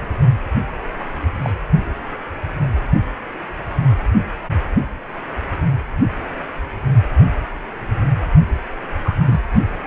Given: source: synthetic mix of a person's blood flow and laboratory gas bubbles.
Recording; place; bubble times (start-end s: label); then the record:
Doppler ultrasound of blood flow; precordium
0.99-1.04 s: bubbles
1.42-1.53 s: bubbles
9.04-9.14 s: bubbles
9.26-9.41 s: bubbles
From the record:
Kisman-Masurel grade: 122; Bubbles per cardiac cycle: 1 to 2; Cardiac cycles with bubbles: 10 to 50%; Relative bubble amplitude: moderate (0.250 to 0.450); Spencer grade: 2 (many but less than half of the cardiac periods contain bubble signals, singularly or in groups); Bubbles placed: only in the low amplitude regions of the cardiac cycle